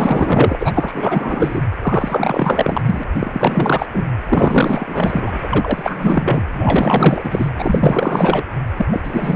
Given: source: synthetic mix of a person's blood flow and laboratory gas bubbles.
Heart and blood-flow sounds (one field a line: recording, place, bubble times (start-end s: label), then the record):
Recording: Doppler ultrasound of blood flow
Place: precordium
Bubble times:
0.00-1.61 s: bubbles
1.81-3.04 s: bubbles
3.14-3.86 s: bubbles
3.92-4.08 s: bubbles
4.29-5.39 s: bubbles
5.42-6.43 s: bubbles
6.53-7.50 s: bubbles
7.58-8.43 s: bubbles
8.77-8.86 s: bubbles
8.92-9.00 s: bubbles
9.04-9.36 s: bubbles
From the record:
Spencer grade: 4 (maximum detectable bubble signal sounding continuously throughout systole and diastole of every cardiac period, and overriding the amplitude of the normal cardiac signals)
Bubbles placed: anywhere in the cardiac cycle